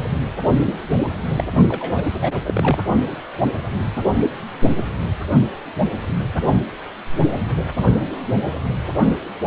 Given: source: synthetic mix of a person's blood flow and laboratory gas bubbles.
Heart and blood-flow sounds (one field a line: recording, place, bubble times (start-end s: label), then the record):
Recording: Doppler ultrasound of blood flow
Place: precordium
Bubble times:
0.66-0.73 s: bubbles
0.98-1.07 s: bubbles
1.36-1.44 s: bubbles
1.69-2.04 s: bubbles
2.21-2.33 s: bubbles
2.46-2.79 s: bubbles
From the record:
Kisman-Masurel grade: 222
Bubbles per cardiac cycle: several, 3 to 8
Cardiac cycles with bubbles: 10 to 50%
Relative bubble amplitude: moderate (0.250 to 0.450)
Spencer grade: 2 (many but less than half of the cardiac periods contain bubble signals, singularly or in groups)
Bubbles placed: only in the low amplitude regions of the cardiac cycle